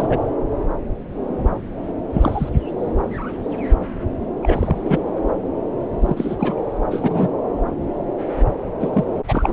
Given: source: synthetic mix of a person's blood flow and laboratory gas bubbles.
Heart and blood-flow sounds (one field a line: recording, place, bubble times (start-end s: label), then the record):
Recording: Doppler ultrasound of blood flow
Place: subclavian vein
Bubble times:
0.00-0.18 s: bubbles
2.14-2.49 s: bubbles
4.42-4.76 s: bubbles
4.84-4.99 s: bubbles
6.00-6.55 s: bubbles
6.91-7.29 s: bubbles
8.80-9.04 s: bubbles
9.27-9.52 s: bubbles
From the record:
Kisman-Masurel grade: 233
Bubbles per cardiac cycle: several, 3 to 8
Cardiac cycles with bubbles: 50 to 99%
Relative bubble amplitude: loud (0.450 to 0.775)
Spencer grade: 3 (all of the cardiac periods contain showers or single bubble signals, but not dominating or overriding the cardiac motion signals)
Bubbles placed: anywhere in the cardiac cycle